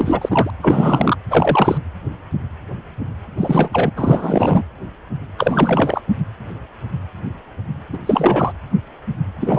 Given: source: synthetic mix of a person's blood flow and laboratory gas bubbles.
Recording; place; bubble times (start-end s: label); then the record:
Doppler ultrasound of blood flow; precordium
0.00-0.50 s: bubbles
0.61-1.16 s: bubbles
1.29-1.78 s: bubbles
3.38-3.70 s: bubbles
3.73-3.91 s: bubbles
3.96-4.63 s: bubbles
5.38-6.01 s: bubbles
7.93-7.98 s: bubbles
8.05-8.53 s: bubbles
9.40-9.59 s: bubbles
From the record:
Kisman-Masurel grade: 333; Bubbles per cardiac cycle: rolling drumbeat, 9 or more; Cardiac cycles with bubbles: 50 to 99%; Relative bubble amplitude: loud (0.450 to 0.775); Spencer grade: 3 (all of the cardiac periods contain showers or single bubble signals, but not dominating or overriding the cardiac motion signals); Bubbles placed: anywhere in the cardiac cycle